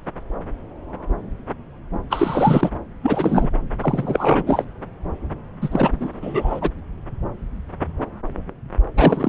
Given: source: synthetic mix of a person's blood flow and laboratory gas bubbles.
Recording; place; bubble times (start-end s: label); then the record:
Doppler ultrasound of blood flow; subclavian vein
2.09-2.70 s: bubbles
3.02-3.48 s: bubbles
3.81-4.65 s: bubbles
5.62-6.71 s: bubbles
8.96-9.29 s: bubbles
From the record:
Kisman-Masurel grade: 333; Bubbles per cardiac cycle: rolling drumbeat, 9 or more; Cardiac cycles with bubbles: 50 to 99%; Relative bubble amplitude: loud (0.450 to 0.775); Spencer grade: 3 (all of the cardiac periods contain showers or single bubble signals, but not dominating or overriding the cardiac motion signals); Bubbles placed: anywhere in the cardiac cycle